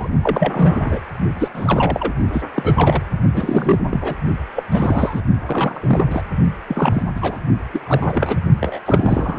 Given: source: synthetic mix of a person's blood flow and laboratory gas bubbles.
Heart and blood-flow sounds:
Doppler ultrasound of blood flow; precordium
0.00-0.08 s: bubbles
0.23-1.00 s: bubbles
1.38-1.49 s: bubbles
1.54-2.12 s: bubbles
2.32-2.42 s: bubbles
2.54-3.02 s: bubbles
3.34-3.79 s: bubbles
3.91-4.15 s: bubbles
4.55-4.63 s: bubbles
4.71-5.21 s: bubbles
5.46-6.06 s: bubbles
6.10-6.21 s: bubbles
6.68-7.02 s: bubbles
7.15-7.38 s: bubbles
7.72-7.81 s: bubbles
7.86-8.37 s: bubbles
8.61-8.80 s: bubbles
8.86-9.39 s: bubbles
From the record:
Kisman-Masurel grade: 343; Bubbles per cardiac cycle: rolling drumbeat, 9 or more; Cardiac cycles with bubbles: 100%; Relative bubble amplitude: loud (0.450 to 0.775); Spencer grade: 3 (all of the cardiac periods contain showers or single bubble signals, but not dominating or overriding the cardiac motion signals); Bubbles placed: only in the low amplitude regions of the cardiac cycle

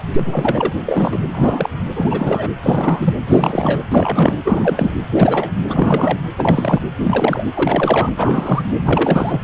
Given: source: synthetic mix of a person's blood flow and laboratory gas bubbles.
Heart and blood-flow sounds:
Doppler ultrasound of blood flow; precordium
0.12-0.73 s: bubbles
0.86-1.23 s: bubbles
1.31-1.69 s: bubbles
1.96-2.50 s: bubbles
2.62-3.14 s: bubbles
3.27-3.82 s: bubbles
3.90-4.40 s: bubbles
4.45-4.96 s: bubbles
5.12-5.52 s: bubbles
5.65-6.17 s: bubbles
6.36-6.80 s: bubbles
7.03-7.47 s: bubbles
7.54-8.09 s: bubbles
8.17-8.62 s: bubbles
8.85-9.41 s: bubbles
From the record:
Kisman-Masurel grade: 342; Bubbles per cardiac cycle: rolling drumbeat, 9 or more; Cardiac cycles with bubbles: 100%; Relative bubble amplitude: moderate (0.250 to 0.450); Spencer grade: 3 (all of the cardiac periods contain showers or single bubble signals, but not dominating or overriding the cardiac motion signals); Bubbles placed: anywhere in the cardiac cycle

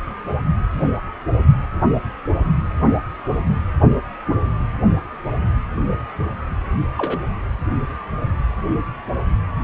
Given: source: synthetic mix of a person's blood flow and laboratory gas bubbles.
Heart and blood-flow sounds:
Doppler ultrasound of blood flow; precordium
6.98-7.18 s: bubbles
From the record:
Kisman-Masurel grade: 112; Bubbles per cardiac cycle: 1 to 2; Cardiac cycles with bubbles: 1 to 10%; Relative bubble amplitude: moderate (0.250 to 0.450); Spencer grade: 1 (occasional bubble signal discernible with the cardiac motion signal, with majority of cardiac periods free of bubbles); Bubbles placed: anywhere in the cardiac cycle

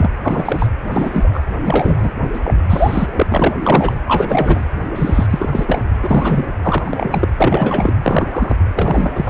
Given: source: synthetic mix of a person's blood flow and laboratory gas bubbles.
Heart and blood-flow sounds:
Doppler ultrasound of blood flow; precordium
0.00-0.10 s: bubbles
0.24-0.69 s: bubbles
0.86-1.42 s: bubbles
1.64-2.12 s: bubbles
2.19-2.29 s: bubbles
2.33-2.40 s: bubbles
2.44-2.54 s: bubbles
2.69-3.10 s: bubbles
3.12-3.54 s: bubbles
3.62-3.96 s: bubbles
4.07-4.66 s: bubbles
4.95-5.26 s: bubbles
5.29-5.82 s: bubbles
6.01-6.45 s: bubbles
6.63-7.28 s: bubbles
7.38-7.93 s: bubbles
8.03-8.59 s: bubbles
8.75-9.30 s: bubbles
From the record:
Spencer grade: 3 (all of the cardiac periods contain showers or single bubble signals, but not dominating or overriding the cardiac motion signals); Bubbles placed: anywhere in the cardiac cycle

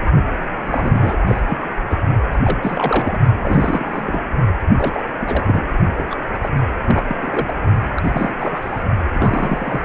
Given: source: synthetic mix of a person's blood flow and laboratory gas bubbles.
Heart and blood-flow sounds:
Doppler ultrasound of blood flow; precordium
0.66-1.18 s: bubbles
1.27-1.41 s: bubbles
1.48-1.57 s: bubbles
1.90-1.97 s: bubbles
2.32-2.38 s: bubbles
2.42-2.58 s: bubbles
2.62-3.18 s: bubbles
3.38-4.22 s: bubbles
4.77-5.05 s: bubbles
5.20-5.63 s: bubbles
5.97-6.05 s: bubbles
6.10-6.17 s: bubbles
6.42-6.49 s: bubbles
6.86-7.17 s: bubbles
7.22-7.53 s: bubbles
7.96-8.34 s: bubbles
8.38-8.83 s: bubbles
9.12-9.85 s: bubbles
From the record:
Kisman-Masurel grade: 332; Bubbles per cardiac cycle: rolling drumbeat, 9 or more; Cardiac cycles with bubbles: 50 to 99%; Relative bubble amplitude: moderate (0.250 to 0.450); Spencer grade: 3 (all of the cardiac periods contain showers or single bubble signals, but not dominating or overriding the cardiac motion signals); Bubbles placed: only in the low amplitude regions of the cardiac cycle

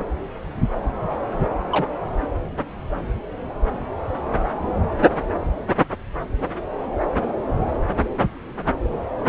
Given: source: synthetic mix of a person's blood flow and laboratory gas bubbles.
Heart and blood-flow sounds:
Doppler ultrasound of blood flow; subclavian vein
1.72-1.87 s: bubbles
From the record:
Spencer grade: 1 (occasional bubble signal discernible with the cardiac motion signal, with majority of cardiac periods free of bubbles); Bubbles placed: anywhere in the cardiac cycle

